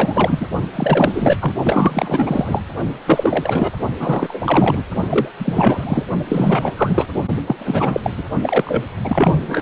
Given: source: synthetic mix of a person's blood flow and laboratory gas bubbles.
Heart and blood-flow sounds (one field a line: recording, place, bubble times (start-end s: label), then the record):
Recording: Doppler ultrasound of blood flow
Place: precordium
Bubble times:
0.00-0.46 s: bubbles
0.75-1.37 s: bubbles
1.41-1.52 s: bubbles
1.64-2.62 s: bubbles
3.06-3.71 s: bubbles
3.99-4.83 s: bubbles
5.09-5.29 s: bubbles
5.39-6.04 s: bubbles
6.28-6.74 s: bubbles
6.77-7.07 s: bubbles
7.47-7.55 s: bubbles
7.58-8.11 s: bubbles
8.17-8.23 s: bubbles
8.42-8.84 s: bubbles
9.04-9.61 s: bubbles
From the record:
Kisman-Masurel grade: 444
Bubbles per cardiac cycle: continuous sound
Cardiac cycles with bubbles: 100%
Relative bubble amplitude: maximal (0.775 to 0.999)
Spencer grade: 4 (maximum detectable bubble signal sounding continuously throughout systole and diastole of every cardiac period, and overriding the amplitude of the normal cardiac signals)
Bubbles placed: only in the low amplitude regions of the cardiac cycle